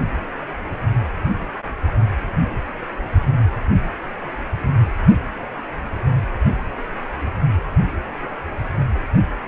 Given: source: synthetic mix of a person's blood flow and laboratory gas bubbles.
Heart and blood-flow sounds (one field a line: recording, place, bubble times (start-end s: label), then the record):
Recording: Doppler ultrasound of blood flow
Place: precordium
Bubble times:
no bubbles
From the record:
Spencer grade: 0 (complete lack of bubble signals)